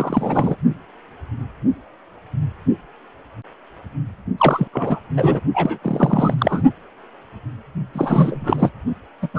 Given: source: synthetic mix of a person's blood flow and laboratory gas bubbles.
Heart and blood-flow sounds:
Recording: Doppler ultrasound of blood flow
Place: precordium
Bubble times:
0.00-0.56 s: bubbles
4.38-4.68 s: bubbles
4.73-5.01 s: bubbles
5.17-5.40 s: bubbles
5.54-5.78 s: bubbles
5.83-6.63 s: bubbles
7.94-8.70 s: bubbles
9.22-9.29 s: bubbles
9.34-9.39 s: bubbles
From the record:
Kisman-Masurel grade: 333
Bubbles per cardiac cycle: rolling drumbeat, 9 or more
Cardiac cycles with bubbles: 50 to 99%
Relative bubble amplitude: loud (0.450 to 0.775)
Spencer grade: 3 (all of the cardiac periods contain showers or single bubble signals, but not dominating or overriding the cardiac motion signals)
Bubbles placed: only in the low amplitude regions of the cardiac cycle

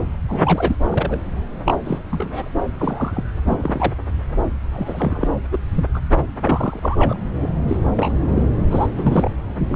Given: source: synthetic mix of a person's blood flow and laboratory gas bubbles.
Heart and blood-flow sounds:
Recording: Doppler ultrasound of blood flow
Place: subclavian vein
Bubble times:
0.29-0.76 s: bubbles
0.89-1.21 s: bubbles
1.65-1.75 s: bubbles
1.85-1.99 s: bubbles
2.10-2.48 s: bubbles
2.78-3.23 s: bubbles
3.46-3.93 s: bubbles
4.72-5.27 s: bubbles
5.51-5.58 s: bubbles
5.73-5.84 s: bubbles
5.93-5.99 s: bubbles
6.42-7.21 s: bubbles
7.42-7.48 s: bubbles
7.67-7.77 s: bubbles
7.96-8.13 s: bubbles
8.28-8.43 s: bubbles
8.70-8.87 s: bubbles
8.96-9.29 s: bubbles
9.68-9.76 s: bubbles
From the record:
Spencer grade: 3 (all of the cardiac periods contain showers or single bubble signals, but not dominating or overriding the cardiac motion signals)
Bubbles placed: anywhere in the cardiac cycle

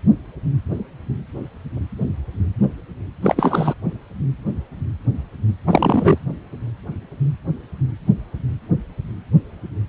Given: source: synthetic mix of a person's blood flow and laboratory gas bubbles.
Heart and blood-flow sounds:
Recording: Doppler ultrasound of blood flow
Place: precordium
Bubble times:
3.23-3.74 s: bubbles
5.67-6.18 s: bubbles
From the record:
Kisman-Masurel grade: 213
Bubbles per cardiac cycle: several, 3 to 8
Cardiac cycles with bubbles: 1 to 10%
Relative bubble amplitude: loud (0.450 to 0.775)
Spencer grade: 1 (occasional bubble signal discernible with the cardiac motion signal, with majority of cardiac periods free of bubbles)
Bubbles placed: anywhere in the cardiac cycle

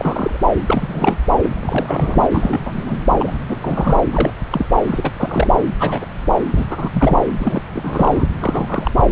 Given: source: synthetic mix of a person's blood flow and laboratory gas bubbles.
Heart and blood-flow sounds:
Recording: Doppler ultrasound of blood flow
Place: subclavian vein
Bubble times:
0.00-0.39 s: bubbles
0.67-1.19 s: bubbles
1.40-2.29 s: bubbles
2.31-2.98 s: bubbles
3.18-3.37 s: bubbles
3.48-4.00 s: bubbles
4.12-4.30 s: bubbles
4.51-4.66 s: bubbles
4.87-5.11 s: bubbles
5.17-5.50 s: bubbles
5.79-6.05 s: bubbles
6.55-7.24 s: bubbles
7.38-7.61 s: bubbles
7.73-8.28 s: bubbles
8.39-8.91 s: bubbles
From the record:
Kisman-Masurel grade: 242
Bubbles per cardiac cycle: several, 3 to 8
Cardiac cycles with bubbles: 100%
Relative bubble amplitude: moderate (0.250 to 0.450)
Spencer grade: 3 (all of the cardiac periods contain showers or single bubble signals, but not dominating or overriding the cardiac motion signals)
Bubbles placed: anywhere in the cardiac cycle

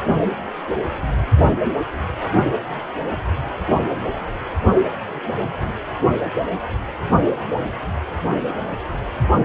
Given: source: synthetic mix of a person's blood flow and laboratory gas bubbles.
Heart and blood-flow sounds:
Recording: Doppler ultrasound of blood flow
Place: precordium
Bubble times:
no bubbles
From the record:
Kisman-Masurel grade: 000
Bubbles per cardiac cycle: 0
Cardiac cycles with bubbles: 0%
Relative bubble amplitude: no bubbles discernible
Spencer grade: 0 (complete lack of bubble signals)

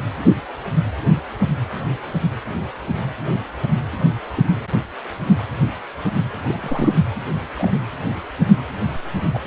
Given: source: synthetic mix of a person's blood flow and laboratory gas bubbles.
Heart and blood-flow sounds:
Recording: Doppler ultrasound of blood flow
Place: precordium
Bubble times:
4.36-4.45 s: bubbles
6.47-6.92 s: bubbles
7.54-7.70 s: bubbles
9.33-9.39 s: bubbles
From the record:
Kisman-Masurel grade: 122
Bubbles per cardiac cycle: 1 to 2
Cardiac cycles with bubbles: 10 to 50%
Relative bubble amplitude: moderate (0.250 to 0.450)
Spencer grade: 2 (many but less than half of the cardiac periods contain bubble signals, singularly or in groups)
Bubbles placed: anywhere in the cardiac cycle

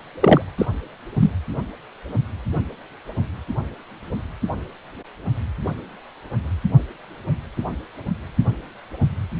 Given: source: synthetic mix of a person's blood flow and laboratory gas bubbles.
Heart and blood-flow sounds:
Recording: Doppler ultrasound of blood flow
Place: precordium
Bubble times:
0.20-0.42 s: bubbles
0.58-0.66 s: bubbles
1.19-1.33 s: bubbles
From the record:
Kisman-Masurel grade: 123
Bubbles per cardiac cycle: 1 to 2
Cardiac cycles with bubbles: 10 to 50%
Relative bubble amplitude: loud (0.450 to 0.775)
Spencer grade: 2 (many but less than half of the cardiac periods contain bubble signals, singularly or in groups)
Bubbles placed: anywhere in the cardiac cycle

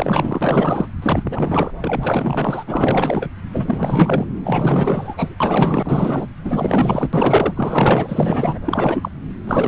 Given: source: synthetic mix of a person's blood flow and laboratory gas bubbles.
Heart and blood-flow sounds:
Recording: Doppler ultrasound of blood flow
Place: subclavian vein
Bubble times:
0.00-0.89 s: bubbles
1.02-1.72 s: bubbles
1.80-2.64 s: bubbles
2.67-3.29 s: bubbles
3.52-4.26 s: bubbles
4.43-5.35 s: bubbles
5.40-6.27 s: bubbles
6.44-7.09 s: bubbles
7.13-8.59 s: bubbles
8.65-9.09 s: bubbles
9.47-9.68 s: bubbles
From the record:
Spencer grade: 4 (maximum detectable bubble signal sounding continuously throughout systole and diastole of every cardiac period, and overriding the amplitude of the normal cardiac signals)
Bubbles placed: anywhere in the cardiac cycle

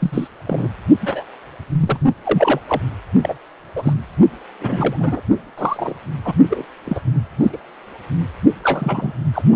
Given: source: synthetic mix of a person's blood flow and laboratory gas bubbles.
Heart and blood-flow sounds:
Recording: Doppler ultrasound of blood flow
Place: precordium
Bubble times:
0.00-0.28 s: bubbles
0.46-0.69 s: bubbles
1.01-1.25 s: bubbles
1.79-1.99 s: bubbles
2.25-2.60 s: bubbles
2.68-2.82 s: bubbles
3.22-3.35 s: bubbles
3.76-3.93 s: bubbles
4.61-5.21 s: bubbles
5.58-5.94 s: bubbles
6.24-6.34 s: bubbles
6.50-6.65 s: bubbles
6.86-7.01 s: bubbles
7.40-7.50 s: bubbles
7.52-7.57 s: bubbles
8.63-9.12 s: bubbles
9.33-9.42 s: bubbles
9.52-9.56 s: bubbles
From the record:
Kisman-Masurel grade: 242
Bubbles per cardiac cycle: several, 3 to 8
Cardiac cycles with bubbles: 100%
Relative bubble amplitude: moderate (0.250 to 0.450)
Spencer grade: 3 (all of the cardiac periods contain showers or single bubble signals, but not dominating or overriding the cardiac motion signals)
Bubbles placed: only in the low amplitude regions of the cardiac cycle

